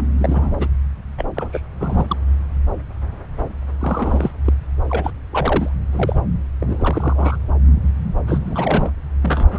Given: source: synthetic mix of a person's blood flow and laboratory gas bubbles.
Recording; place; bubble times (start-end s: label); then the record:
Doppler ultrasound of blood flow; subclavian vein
0.00-0.04 s: bubbles
0.18-0.67 s: bubbles
1.18-1.25 s: bubbles
1.35-1.50 s: bubbles
1.53-1.61 s: bubbles
1.80-2.05 s: bubbles
2.08-2.17 s: bubbles
3.79-4.31 s: bubbles
4.45-4.53 s: bubbles
4.88-5.11 s: bubbles
5.30-5.69 s: bubbles
5.92-6.21 s: bubbles
6.60-7.37 s: bubbles
8.27-8.91 s: bubbles
9.22-9.59 s: bubbles
From the record:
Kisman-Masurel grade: 232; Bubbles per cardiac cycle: several, 3 to 8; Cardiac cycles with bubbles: 50 to 99%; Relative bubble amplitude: moderate (0.250 to 0.450); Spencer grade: 3 (all of the cardiac periods contain showers or single bubble signals, but not dominating or overriding the cardiac motion signals); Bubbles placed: anywhere in the cardiac cycle